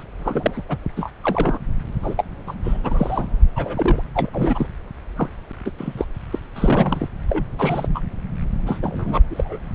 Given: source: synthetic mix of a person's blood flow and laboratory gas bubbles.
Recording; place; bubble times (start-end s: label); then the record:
Doppler ultrasound of blood flow; subclavian vein
0.00-0.03 s: bubbles
0.18-0.62 s: bubbles
0.69-0.77 s: bubbles
0.96-1.09 s: bubbles
1.23-1.58 s: bubbles
2.02-2.15 s: bubbles
2.17-2.24 s: bubbles
2.47-2.54 s: bubbles
2.64-2.77 s: bubbles
2.83-3.27 s: bubbles
3.56-4.02 s: bubbles
4.14-4.67 s: bubbles
5.16-5.29 s: bubbles
5.66-5.70 s: bubbles
5.78-6.05 s: bubbles
6.31-6.39 s: bubbles
6.55-7.08 s: bubbles
7.28-7.45 s: bubbles
7.58-8.01 s: bubbles
8.67-8.79 s: bubbles
8.82-9.21 s: bubbles
9.30-9.57 s: bubbles
From the record:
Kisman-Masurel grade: 242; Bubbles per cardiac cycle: several, 3 to 8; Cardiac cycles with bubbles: 100%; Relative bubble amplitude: moderate (0.250 to 0.450); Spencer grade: 3 (all of the cardiac periods contain showers or single bubble signals, but not dominating or overriding the cardiac motion signals); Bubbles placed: anywhere in the cardiac cycle